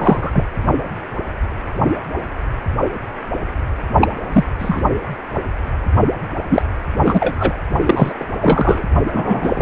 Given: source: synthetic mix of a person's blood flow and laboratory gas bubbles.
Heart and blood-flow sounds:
Doppler ultrasound of blood flow; precordium
0.00-0.45 s: bubbles
4.00-4.08 s: bubbles
4.32-4.44 s: bubbles
4.59-4.81 s: bubbles
6.49-6.62 s: bubbles
7.04-7.62 s: bubbles
7.86-8.13 s: bubbles
8.20-8.25 s: bubbles
8.41-8.84 s: bubbles
9.12-9.62 s: bubbles
From the record:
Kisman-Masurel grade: 223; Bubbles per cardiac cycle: several, 3 to 8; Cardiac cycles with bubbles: 10 to 50%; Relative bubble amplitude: loud (0.450 to 0.775); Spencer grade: 2 (many but less than half of the cardiac periods contain bubble signals, singularly or in groups); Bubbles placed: only in the low amplitude regions of the cardiac cycle

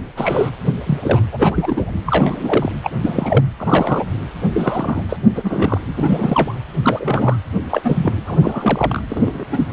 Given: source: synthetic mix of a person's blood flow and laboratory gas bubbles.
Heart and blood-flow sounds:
Doppler ultrasound of blood flow; precordium
0.17-0.50 s: bubbles
0.86-0.98 s: bubbles
1.02-1.22 s: bubbles
1.31-1.91 s: bubbles
1.95-2.00 s: bubbles
2.05-2.71 s: bubbles
2.83-2.91 s: bubbles
3.01-3.45 s: bubbles
3.58-4.04 s: bubbles
4.54-5.02 s: bubbles
5.08-5.17 s: bubbles
5.34-5.78 s: bubbles
5.96-6.54 s: bubbles
6.82-7.37 s: bubbles
7.69-8.13 s: bubbles
8.26-9.03 s: bubbles
9.09-9.45 s: bubbles
9.52-9.66 s: bubbles
From the record:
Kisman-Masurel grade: 243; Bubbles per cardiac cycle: several, 3 to 8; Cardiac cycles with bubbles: 100%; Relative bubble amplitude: loud (0.450 to 0.775); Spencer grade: 3 (all of the cardiac periods contain showers or single bubble signals, but not dominating or overriding the cardiac motion signals); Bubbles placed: anywhere in the cardiac cycle

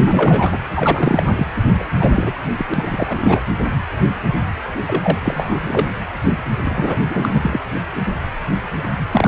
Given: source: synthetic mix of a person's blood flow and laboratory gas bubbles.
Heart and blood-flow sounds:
Doppler ultrasound of blood flow; precordium
0.02-0.58 s: bubbles
0.74-1.47 s: bubbles
1.79-1.84 s: bubbles
2.00-2.33 s: bubbles
2.57-2.66 s: bubbles
2.71-3.40 s: bubbles
4.85-5.18 s: bubbles
5.25-5.56 s: bubbles
5.61-5.88 s: bubbles
6.64-7.03 s: bubbles
7.08-7.58 s: bubbles
9.12-9.28 s: bubbles
From the record:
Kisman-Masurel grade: 333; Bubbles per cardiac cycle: rolling drumbeat, 9 or more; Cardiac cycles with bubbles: 50 to 99%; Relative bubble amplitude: loud (0.450 to 0.775); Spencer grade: 3 (all of the cardiac periods contain showers or single bubble signals, but not dominating or overriding the cardiac motion signals); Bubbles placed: anywhere in the cardiac cycle

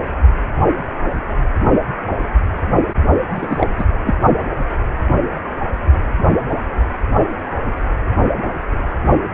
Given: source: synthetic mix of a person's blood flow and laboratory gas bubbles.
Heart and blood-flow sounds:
Doppler ultrasound of blood flow; precordium
3.35-3.67 s: bubbles
3.78-3.84 s: bubbles
4.04-4.16 s: bubbles
From the record:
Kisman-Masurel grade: 213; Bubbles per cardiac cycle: several, 3 to 8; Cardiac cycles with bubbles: 1 to 10%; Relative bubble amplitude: loud (0.450 to 0.775); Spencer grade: 1 (occasional bubble signal discernible with the cardiac motion signal, with majority of cardiac periods free of bubbles); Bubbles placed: only in the low amplitude regions of the cardiac cycle

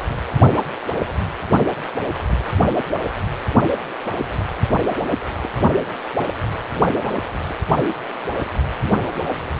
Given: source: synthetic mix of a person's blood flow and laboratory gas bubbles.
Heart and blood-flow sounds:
Doppler ultrasound of blood flow; precordium
5.43-5.49 s: bubbles
5.69-5.79 s: bubbles
6.23-6.27 s: bubbles
6.72-6.83 s: bubbles
7.50-7.54 s: bubbles
From the record:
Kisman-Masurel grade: 121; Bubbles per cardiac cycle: 1 to 2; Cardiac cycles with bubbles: 10 to 50%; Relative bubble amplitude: barely perceptible (0.100 to 0.250); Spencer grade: 2 (many but less than half of the cardiac periods contain bubble signals, singularly or in groups); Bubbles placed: anywhere in the cardiac cycle

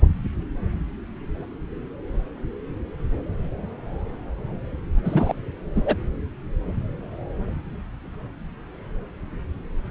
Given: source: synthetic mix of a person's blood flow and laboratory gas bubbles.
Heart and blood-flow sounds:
Doppler ultrasound of blood flow; subclavian vein
5.04-5.34 s: bubbles
5.74-5.96 s: bubbles
From the record:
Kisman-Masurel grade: 223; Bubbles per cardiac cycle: several, 3 to 8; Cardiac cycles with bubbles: 10 to 50%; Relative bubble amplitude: loud (0.450 to 0.775); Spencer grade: 2 (many but less than half of the cardiac periods contain bubble signals, singularly or in groups); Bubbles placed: anywhere in the cardiac cycle

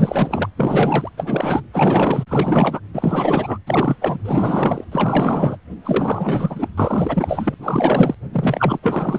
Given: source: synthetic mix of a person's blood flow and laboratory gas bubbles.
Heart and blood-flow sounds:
Doppler ultrasound of blood flow; precordium
0.00-0.49 s: bubbles
0.56-1.09 s: bubbles
1.17-1.61 s: bubbles
1.73-2.24 s: bubbles
2.28-2.80 s: bubbles
2.94-3.58 s: bubbles
3.67-3.96 s: bubbles
4.01-4.18 s: bubbles
4.24-4.84 s: bubbles
4.92-5.57 s: bubbles
5.83-6.68 s: bubbles
6.78-7.55 s: bubbles
7.63-8.14 s: bubbles
8.32-8.79 s: bubbles
8.82-9.19 s: bubbles
From the record:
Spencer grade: 4 (maximum detectable bubble signal sounding continuously throughout systole and diastole of every cardiac period, and overriding the amplitude of the normal cardiac signals); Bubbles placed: anywhere in the cardiac cycle

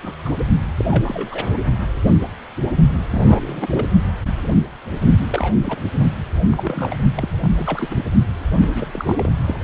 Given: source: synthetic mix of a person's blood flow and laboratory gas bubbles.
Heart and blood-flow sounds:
Doppler ultrasound of blood flow; precordium
0.03-0.13 s: bubbles
0.24-0.31 s: bubbles
0.77-0.84 s: bubbles
0.90-1.58 s: bubbles
3.11-3.67 s: bubbles
3.70-3.86 s: bubbles
5.28-5.56 s: bubbles
5.61-5.79 s: bubbles
5.99-6.16 s: bubbles
6.50-6.97 s: bubbles
7.16-7.29 s: bubbles
7.39-8.03 s: bubbles
8.56-9.32 s: bubbles
9.46-9.56 s: bubbles
From the record:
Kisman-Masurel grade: 332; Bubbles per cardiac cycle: rolling drumbeat, 9 or more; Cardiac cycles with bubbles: 50 to 99%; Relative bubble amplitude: moderate (0.250 to 0.450); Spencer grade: 3 (all of the cardiac periods contain showers or single bubble signals, but not dominating or overriding the cardiac motion signals); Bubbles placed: only in the low amplitude regions of the cardiac cycle

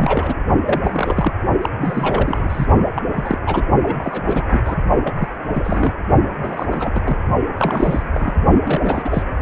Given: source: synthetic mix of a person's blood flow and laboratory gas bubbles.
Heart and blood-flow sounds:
Doppler ultrasound of blood flow; precordium
0.00-0.39 s: bubbles
0.66-1.34 s: bubbles
1.61-1.69 s: bubbles
1.79-2.67 s: bubbles
2.95-3.02 s: bubbles
3.14-3.38 s: bubbles
3.46-3.63 s: bubbles
3.82-4.42 s: bubbles
4.50-4.60 s: bubbles
4.64-4.77 s: bubbles
5.04-5.29 s: bubbles
5.53-5.92 s: bubbles
6.41-6.67 s: bubbles
6.71-6.90 s: bubbles
6.95-7.00 s: bubbles
7.03-7.17 s: bubbles
7.58-8.08 s: bubbles
8.13-8.34 s: bubbles
8.64-9.22 s: bubbles
From the record:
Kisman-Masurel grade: 342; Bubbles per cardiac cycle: rolling drumbeat, 9 or more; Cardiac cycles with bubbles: 100%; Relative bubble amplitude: moderate (0.250 to 0.450); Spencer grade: 3 (all of the cardiac periods contain showers or single bubble signals, but not dominating or overriding the cardiac motion signals); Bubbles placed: only in the low amplitude regions of the cardiac cycle

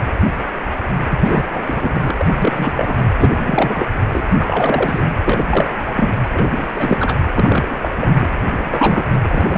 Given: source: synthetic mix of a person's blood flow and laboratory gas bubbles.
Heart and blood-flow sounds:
Doppler ultrasound of blood flow; precordium
1.09-1.44 s: bubbles
1.50-2.12 s: bubbles
2.19-3.04 s: bubbles
3.19-3.42 s: bubbles
3.46-3.89 s: bubbles
4.12-4.24 s: bubbles
4.39-5.05 s: bubbles
5.25-5.43 s: bubbles
5.50-5.81 s: bubbles
5.86-5.92 s: bubbles
5.96-6.09 s: bubbles
6.24-6.29 s: bubbles
6.33-6.50 s: bubbles
6.59-6.67 s: bubbles
6.75-7.16 s: bubbles
7.35-7.89 s: bubbles
7.97-8.15 s: bubbles
8.18-8.28 s: bubbles
8.51-9.05 s: bubbles
9.24-9.58 s: bubbles
From the record:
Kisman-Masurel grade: 333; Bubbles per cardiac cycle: rolling drumbeat, 9 or more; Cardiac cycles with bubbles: 50 to 99%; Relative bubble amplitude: loud (0.450 to 0.775); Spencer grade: 3 (all of the cardiac periods contain showers or single bubble signals, but not dominating or overriding the cardiac motion signals); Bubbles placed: anywhere in the cardiac cycle

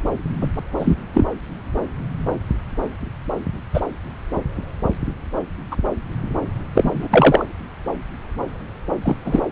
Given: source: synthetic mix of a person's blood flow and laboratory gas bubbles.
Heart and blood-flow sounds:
Doppler ultrasound of blood flow; subclavian vein
0.41-0.47 s: bubbles
0.79-0.95 s: bubbles
1.14-1.25 s: bubbles
3.74-3.81 s: bubbles
5.71-5.76 s: bubbles
6.75-7.08 s: bubbles
7.13-7.45 s: bubbles
9.04-9.16 s: bubbles
9.24-9.41 s: bubbles
From the record:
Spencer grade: 2 (many but less than half of the cardiac periods contain bubble signals, singularly or in groups); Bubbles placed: anywhere in the cardiac cycle

